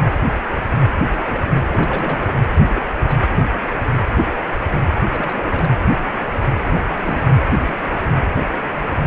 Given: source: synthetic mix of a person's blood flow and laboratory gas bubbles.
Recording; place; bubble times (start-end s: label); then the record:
Doppler ultrasound of blood flow; precordium
1.18-1.53 s: bubbles
1.72-2.33 s: bubbles
2.68-2.82 s: bubbles
3.07-3.18 s: bubbles
3.21-3.27 s: bubbles
5.11-5.68 s: bubbles
6.65-6.81 s: bubbles
6.96-7.41 s: bubbles
7.63-7.74 s: bubbles
7.79-7.90 s: bubbles
From the record:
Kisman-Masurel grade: 221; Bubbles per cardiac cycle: several, 3 to 8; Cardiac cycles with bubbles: 10 to 50%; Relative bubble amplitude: barely perceptible (0.100 to 0.250); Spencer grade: 2 (many but less than half of the cardiac periods contain bubble signals, singularly or in groups); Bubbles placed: anywhere in the cardiac cycle